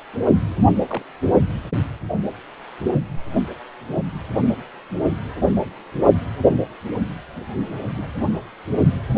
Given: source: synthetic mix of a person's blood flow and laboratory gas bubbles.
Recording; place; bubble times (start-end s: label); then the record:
Doppler ultrasound of blood flow; precordium
0.89-1.02 s: bubbles
7.94-8.06 s: bubbles
From the record:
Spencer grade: 2 (many but less than half of the cardiac periods contain bubble signals, singularly or in groups); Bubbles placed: anywhere in the cardiac cycle